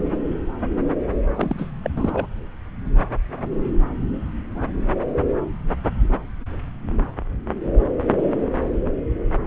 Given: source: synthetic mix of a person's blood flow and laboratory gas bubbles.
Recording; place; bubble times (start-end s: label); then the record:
Doppler ultrasound of blood flow; subclavian vein
1.37-1.70 s: bubbles
1.83-1.91 s: bubbles
1.96-2.27 s: bubbles
From the record:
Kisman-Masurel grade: 212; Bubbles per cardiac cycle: several, 3 to 8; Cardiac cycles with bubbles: 1 to 10%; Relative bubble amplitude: moderate (0.250 to 0.450); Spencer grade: 1 (occasional bubble signal discernible with the cardiac motion signal, with majority of cardiac periods free of bubbles); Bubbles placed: anywhere in the cardiac cycle